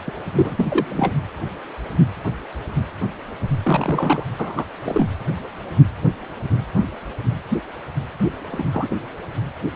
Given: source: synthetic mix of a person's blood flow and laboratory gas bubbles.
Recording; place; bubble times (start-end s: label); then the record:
Doppler ultrasound of blood flow; precordium
0.07-0.12 s: bubbles
0.36-1.14 s: bubbles
3.62-4.24 s: bubbles
4.38-4.64 s: bubbles
4.82-5.06 s: bubbles
8.52-8.67 s: bubbles
8.71-8.96 s: bubbles
From the record:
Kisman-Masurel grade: 222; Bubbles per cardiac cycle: several, 3 to 8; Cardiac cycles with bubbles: 10 to 50%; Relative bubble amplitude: moderate (0.250 to 0.450); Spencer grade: 2 (many but less than half of the cardiac periods contain bubble signals, singularly or in groups); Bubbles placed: anywhere in the cardiac cycle